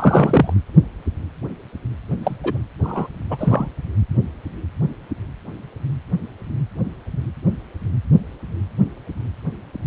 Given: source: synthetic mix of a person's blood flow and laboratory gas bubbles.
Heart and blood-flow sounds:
Doppler ultrasound of blood flow; precordium
0.00-0.53 s: bubbles
2.23-2.36 s: bubbles
2.44-2.58 s: bubbles
2.83-3.07 s: bubbles
3.30-3.69 s: bubbles
From the record:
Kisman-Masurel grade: 223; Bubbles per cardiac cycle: several, 3 to 8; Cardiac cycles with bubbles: 10 to 50%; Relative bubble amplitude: loud (0.450 to 0.775); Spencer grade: 2 (many but less than half of the cardiac periods contain bubble signals, singularly or in groups); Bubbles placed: anywhere in the cardiac cycle

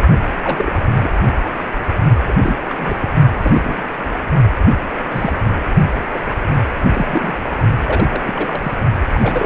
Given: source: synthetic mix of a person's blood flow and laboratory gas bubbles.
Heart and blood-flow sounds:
Doppler ultrasound of blood flow; precordium
0.00-0.02 s: bubbles
0.43-0.74 s: bubbles
1.00-1.11 s: bubbles
2.27-2.32 s: bubbles
2.42-2.56 s: bubbles
2.67-2.98 s: bubbles
3.00-3.09 s: bubbles
3.42-3.87 s: bubbles
5.10-5.33 s: bubbles
6.14-6.20 s: bubbles
6.50-6.55 s: bubbles
6.93-7.38 s: bubbles
7.85-8.72 s: bubbles
9.14-9.46 s: bubbles
From the record:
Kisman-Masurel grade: 242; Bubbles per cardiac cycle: several, 3 to 8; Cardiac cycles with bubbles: 100%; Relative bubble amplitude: moderate (0.250 to 0.450); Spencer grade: 3 (all of the cardiac periods contain showers or single bubble signals, but not dominating or overriding the cardiac motion signals); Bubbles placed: only in the low amplitude regions of the cardiac cycle

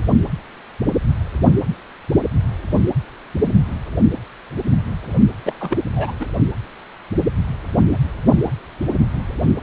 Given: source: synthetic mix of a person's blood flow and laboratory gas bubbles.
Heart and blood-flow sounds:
Doppler ultrasound of blood flow; precordium
5.45-5.54 s: bubbles
5.60-5.78 s: bubbles
5.95-6.12 s: bubbles
6.20-6.26 s: bubbles
From the record:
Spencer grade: 1 (occasional bubble signal discernible with the cardiac motion signal, with majority of cardiac periods free of bubbles); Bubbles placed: only in the low amplitude regions of the cardiac cycle

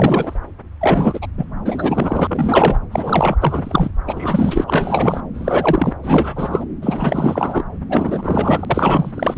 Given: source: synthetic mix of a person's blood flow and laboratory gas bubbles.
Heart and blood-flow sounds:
Doppler ultrasound of blood flow; subclavian vein
0.00-0.36 s: bubbles
0.81-1.27 s: bubbles
1.38-1.44 s: bubbles
1.65-2.79 s: bubbles
2.92-3.36 s: bubbles
3.41-3.92 s: bubbles
4.06-4.64 s: bubbles
4.67-5.21 s: bubbles
5.34-5.95 s: bubbles
6.03-6.64 s: bubbles
6.81-7.64 s: bubbles
7.90-9.12 s: bubbles
9.15-9.38 s: bubbles
From the record:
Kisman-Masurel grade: 343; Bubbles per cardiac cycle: rolling drumbeat, 9 or more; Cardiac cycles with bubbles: 100%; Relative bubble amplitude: loud (0.450 to 0.775); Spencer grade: 3 (all of the cardiac periods contain showers or single bubble signals, but not dominating or overriding the cardiac motion signals); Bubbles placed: anywhere in the cardiac cycle

